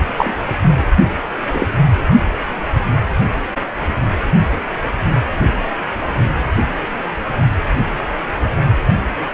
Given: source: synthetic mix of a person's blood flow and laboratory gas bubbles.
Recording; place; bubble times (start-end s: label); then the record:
Doppler ultrasound of blood flow; precordium
0.17-0.34 s: bubbles
1.53-1.68 s: bubbles
From the record:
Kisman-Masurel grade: 123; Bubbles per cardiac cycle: 1 to 2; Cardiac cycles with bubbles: 10 to 50%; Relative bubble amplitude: loud (0.450 to 0.775); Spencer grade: 2 (many but less than half of the cardiac periods contain bubble signals, singularly or in groups); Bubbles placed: only in the low amplitude regions of the cardiac cycle